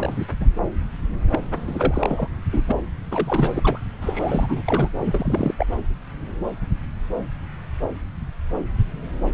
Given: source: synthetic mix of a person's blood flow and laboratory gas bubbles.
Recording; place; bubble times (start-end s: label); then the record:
Doppler ultrasound of blood flow; subclavian vein
0.00-0.27 s: bubbles
0.40-0.45 s: bubbles
1.31-1.40 s: bubbles
1.54-2.27 s: bubbles
2.52-2.62 s: bubbles
2.68-2.72 s: bubbles
3.11-3.78 s: bubbles
4.01-4.90 s: bubbles
5.00-5.54 s: bubbles
5.58-5.66 s: bubbles
From the record:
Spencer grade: 3 (all of the cardiac periods contain showers or single bubble signals, but not dominating or overriding the cardiac motion signals); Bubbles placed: anywhere in the cardiac cycle